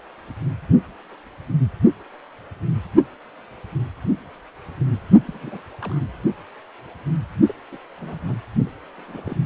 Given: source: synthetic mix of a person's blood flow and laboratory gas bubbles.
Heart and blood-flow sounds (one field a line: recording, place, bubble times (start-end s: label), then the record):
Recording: Doppler ultrasound of blood flow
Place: precordium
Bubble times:
5.26-5.62 s: bubbles
5.80-5.99 s: bubbles
7.47-7.54 s: bubbles
7.71-7.79 s: bubbles
7.97-8.38 s: bubbles
8.66-8.70 s: bubbles
8.97-9.36 s: bubbles
9.43-9.46 s: bubbles
From the record:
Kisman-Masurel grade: 221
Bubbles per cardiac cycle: several, 3 to 8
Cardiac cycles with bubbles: 10 to 50%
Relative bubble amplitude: barely perceptible (0.100 to 0.250)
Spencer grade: 2 (many but less than half of the cardiac periods contain bubble signals, singularly or in groups)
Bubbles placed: only in the low amplitude regions of the cardiac cycle